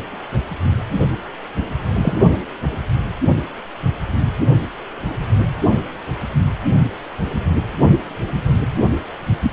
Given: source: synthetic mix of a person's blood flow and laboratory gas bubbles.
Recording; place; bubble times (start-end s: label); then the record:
Doppler ultrasound of blood flow; precordium
1.93-2.17 s: bubbles
From the record:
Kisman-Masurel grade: 123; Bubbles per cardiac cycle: 1 to 2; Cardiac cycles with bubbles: 10 to 50%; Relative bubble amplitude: loud (0.450 to 0.775); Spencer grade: 2 (many but less than half of the cardiac periods contain bubble signals, singularly or in groups); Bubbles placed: only in the low amplitude regions of the cardiac cycle